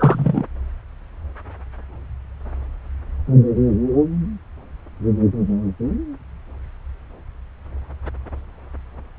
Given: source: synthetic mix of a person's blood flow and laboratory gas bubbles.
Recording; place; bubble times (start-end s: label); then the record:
Doppler ultrasound of blood flow; subclavian vein
0.00-0.44 s: bubbles
From the record:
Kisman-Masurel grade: 113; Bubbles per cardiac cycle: 1 to 2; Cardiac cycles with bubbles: 1 to 10%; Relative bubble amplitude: loud (0.450 to 0.775); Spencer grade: 1 (occasional bubble signal discernible with the cardiac motion signal, with majority of cardiac periods free of bubbles); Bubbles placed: anywhere in the cardiac cycle